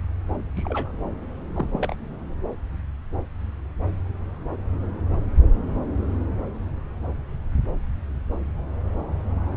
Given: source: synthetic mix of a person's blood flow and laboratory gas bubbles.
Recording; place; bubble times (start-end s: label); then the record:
Doppler ultrasound of blood flow; subclavian vein
0.56-0.91 s: bubbles
1.54-1.67 s: bubbles
1.73-1.95 s: bubbles
From the record:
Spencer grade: 1 (occasional bubble signal discernible with the cardiac motion signal, with majority of cardiac periods free of bubbles); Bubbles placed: anywhere in the cardiac cycle